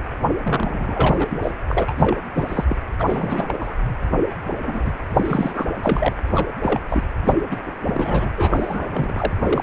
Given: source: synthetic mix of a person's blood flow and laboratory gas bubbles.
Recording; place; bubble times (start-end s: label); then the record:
Doppler ultrasound of blood flow; precordium
0.45-1.39 s: bubbles
1.42-1.52 s: bubbles
1.68-1.93 s: bubbles
1.97-2.17 s: bubbles
2.34-2.77 s: bubbles
2.99-3.77 s: bubbles
4.62-4.94 s: bubbles
5.16-5.65 s: bubbles
5.81-6.13 s: bubbles
6.34-6.47 s: bubbles
6.62-6.80 s: bubbles
6.88-7.03 s: bubbles
7.24-7.40 s: bubbles
7.50-7.57 s: bubbles
7.66-7.71 s: bubbles
7.80-8.31 s: bubbles
8.37-9.32 s: bubbles
9.41-9.63 s: bubbles
From the record:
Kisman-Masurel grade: 332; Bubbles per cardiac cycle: rolling drumbeat, 9 or more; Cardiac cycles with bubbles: 50 to 99%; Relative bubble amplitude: moderate (0.250 to 0.450); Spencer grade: 3 (all of the cardiac periods contain showers or single bubble signals, but not dominating or overriding the cardiac motion signals); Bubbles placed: anywhere in the cardiac cycle